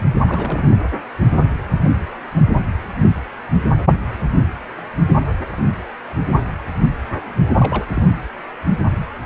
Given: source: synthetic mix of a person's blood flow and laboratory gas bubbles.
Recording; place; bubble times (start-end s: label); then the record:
Doppler ultrasound of blood flow; precordium
0.27-0.80 s: bubbles
7.57-7.86 s: bubbles
7.94-8.13 s: bubbles
From the record:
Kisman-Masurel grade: 211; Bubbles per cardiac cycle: several, 3 to 8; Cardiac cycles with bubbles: 1 to 10%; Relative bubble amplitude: barely perceptible (0.100 to 0.250); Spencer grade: 1 (occasional bubble signal discernible with the cardiac motion signal, with majority of cardiac periods free of bubbles); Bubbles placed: anywhere in the cardiac cycle